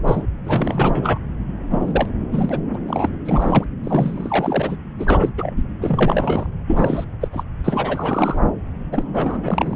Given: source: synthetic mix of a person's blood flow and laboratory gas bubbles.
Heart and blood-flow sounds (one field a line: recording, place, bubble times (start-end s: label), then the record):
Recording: Doppler ultrasound of blood flow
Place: subclavian vein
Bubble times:
0.04-0.23 s: bubbles
0.45-1.19 s: bubbles
1.70-2.10 s: bubbles
2.32-2.60 s: bubbles
2.73-2.76 s: bubbles
2.86-3.09 s: bubbles
3.25-3.65 s: bubbles
3.83-4.77 s: bubbles
4.99-5.32 s: bubbles
5.38-5.54 s: bubbles
5.57-5.62 s: bubbles
5.82-6.47 s: bubbles
6.67-7.05 s: bubbles
7.21-7.28 s: bubbles
7.32-7.44 s: bubbles
7.64-8.39 s: bubbles
8.92-9.03 s: bubbles
9.13-9.76 s: bubbles
From the record:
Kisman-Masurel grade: 343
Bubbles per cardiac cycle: rolling drumbeat, 9 or more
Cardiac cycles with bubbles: 100%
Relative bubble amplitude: loud (0.450 to 0.775)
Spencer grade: 3 (all of the cardiac periods contain showers or single bubble signals, but not dominating or overriding the cardiac motion signals)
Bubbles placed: anywhere in the cardiac cycle